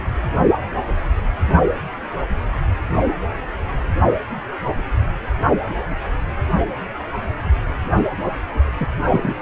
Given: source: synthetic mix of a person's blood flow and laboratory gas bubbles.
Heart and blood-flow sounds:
Doppler ultrasound of blood flow; precordium
8.80-8.87 s: bubbles
9.11-9.35 s: bubbles
From the record:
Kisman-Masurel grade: 113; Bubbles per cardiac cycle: 1 to 2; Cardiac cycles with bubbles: 1 to 10%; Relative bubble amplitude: loud (0.450 to 0.775); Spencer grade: 1 (occasional bubble signal discernible with the cardiac motion signal, with majority of cardiac periods free of bubbles); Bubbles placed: anywhere in the cardiac cycle

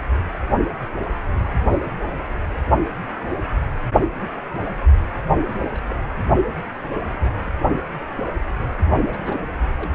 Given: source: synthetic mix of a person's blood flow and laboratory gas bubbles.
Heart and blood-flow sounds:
Doppler ultrasound of blood flow; precordium
5.59-6.02 s: bubbles
6.91-6.97 s: bubbles
7.05-7.53 s: bubbles
9.09-9.41 s: bubbles
9.52-9.57 s: bubbles
9.67-9.92 s: bubbles
From the record:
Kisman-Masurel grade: 221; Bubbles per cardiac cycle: several, 3 to 8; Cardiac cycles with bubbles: 10 to 50%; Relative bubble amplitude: barely perceptible (0.100 to 0.250); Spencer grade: 2 (many but less than half of the cardiac periods contain bubble signals, singularly or in groups); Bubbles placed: only in the low amplitude regions of the cardiac cycle

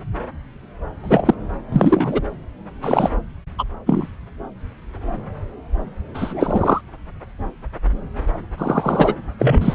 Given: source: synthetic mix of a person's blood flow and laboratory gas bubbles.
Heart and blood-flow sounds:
Doppler ultrasound of blood flow; subclavian vein
1.02-1.35 s: bubbles
1.72-2.21 s: bubbles
2.81-3.09 s: bubbles
3.58-3.64 s: bubbles
3.85-4.06 s: bubbles
6.14-6.81 s: bubbles
8.58-9.15 s: bubbles
9.39-9.74 s: bubbles
From the record:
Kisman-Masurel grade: 233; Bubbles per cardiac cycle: several, 3 to 8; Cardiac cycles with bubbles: 50 to 99%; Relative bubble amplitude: loud (0.450 to 0.775); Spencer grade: 3 (all of the cardiac periods contain showers or single bubble signals, but not dominating or overriding the cardiac motion signals); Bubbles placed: anywhere in the cardiac cycle

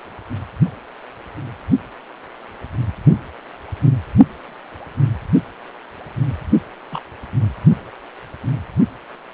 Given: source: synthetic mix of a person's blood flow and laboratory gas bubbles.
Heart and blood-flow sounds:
Doppler ultrasound of blood flow; precordium
6.92-7.01 s: bubbles
From the record:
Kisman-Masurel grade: 112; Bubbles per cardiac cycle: 1 to 2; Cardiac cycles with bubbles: 1 to 10%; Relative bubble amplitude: moderate (0.250 to 0.450); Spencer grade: 1 (occasional bubble signal discernible with the cardiac motion signal, with majority of cardiac periods free of bubbles); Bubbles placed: only in the low amplitude regions of the cardiac cycle

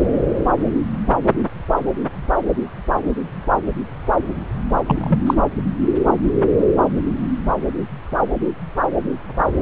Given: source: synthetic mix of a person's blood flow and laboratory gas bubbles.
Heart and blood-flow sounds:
Doppler ultrasound of blood flow; subclavian vein
4.87-5.18 s: bubbles
5.26-5.34 s: bubbles
From the record:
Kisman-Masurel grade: 113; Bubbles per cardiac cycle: 1 to 2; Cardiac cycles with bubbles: 1 to 10%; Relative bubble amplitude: loud (0.450 to 0.775); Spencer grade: 1 (occasional bubble signal discernible with the cardiac motion signal, with majority of cardiac periods free of bubbles); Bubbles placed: anywhere in the cardiac cycle

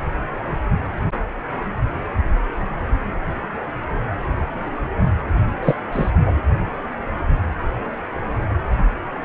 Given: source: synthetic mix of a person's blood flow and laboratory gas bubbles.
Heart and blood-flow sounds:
Doppler ultrasound of blood flow; precordium
5.62-5.75 s: bubbles
5.92-6.11 s: bubbles
6.25-6.33 s: bubbles
From the record:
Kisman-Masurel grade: 213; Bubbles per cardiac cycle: several, 3 to 8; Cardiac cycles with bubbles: 1 to 10%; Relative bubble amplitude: loud (0.450 to 0.775); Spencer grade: 1 (occasional bubble signal discernible with the cardiac motion signal, with majority of cardiac periods free of bubbles); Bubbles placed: anywhere in the cardiac cycle

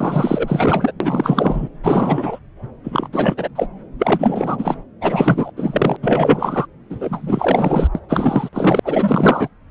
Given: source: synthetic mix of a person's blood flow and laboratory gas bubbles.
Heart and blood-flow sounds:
Doppler ultrasound of blood flow; subclavian vein
0.00-0.92 s: bubbles
1.00-1.68 s: bubbles
1.83-2.39 s: bubbles
2.83-3.08 s: bubbles
3.12-3.48 s: bubbles
3.55-3.67 s: bubbles
3.97-4.76 s: bubbles
5.01-5.52 s: bubbles
5.56-5.97 s: bubbles
6.03-6.67 s: bubbles
6.90-7.88 s: bubbles
7.95-8.00 s: bubbles
8.08-8.49 s: bubbles
8.52-8.79 s: bubbles
8.84-9.48 s: bubbles
From the record:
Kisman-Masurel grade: 444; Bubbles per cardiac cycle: continuous sound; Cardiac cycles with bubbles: 100%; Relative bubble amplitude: maximal (0.775 to 0.999); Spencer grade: 4 (maximum detectable bubble signal sounding continuously throughout systole and diastole of every cardiac period, and overriding the amplitude of the normal cardiac signals); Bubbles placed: anywhere in the cardiac cycle

